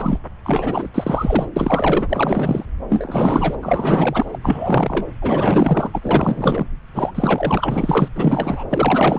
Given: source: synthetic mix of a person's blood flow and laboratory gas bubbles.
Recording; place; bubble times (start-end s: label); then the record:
Doppler ultrasound of blood flow; subclavian vein
0.00-0.18 s: bubbles
0.43-0.89 s: bubbles
0.94-1.46 s: bubbles
1.56-2.66 s: bubbles
2.89-3.57 s: bubbles
3.62-4.38 s: bubbles
4.42-5.05 s: bubbles
5.21-6.67 s: bubbles
6.94-7.12 s: bubbles
7.15-8.08 s: bubbles
8.15-8.63 s: bubbles
8.69-9.19 s: bubbles
From the record:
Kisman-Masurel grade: 444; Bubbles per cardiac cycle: continuous sound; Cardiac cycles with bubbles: 100%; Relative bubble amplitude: maximal (0.775 to 0.999); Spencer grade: 4 (maximum detectable bubble signal sounding continuously throughout systole and diastole of every cardiac period, and overriding the amplitude of the normal cardiac signals); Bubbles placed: anywhere in the cardiac cycle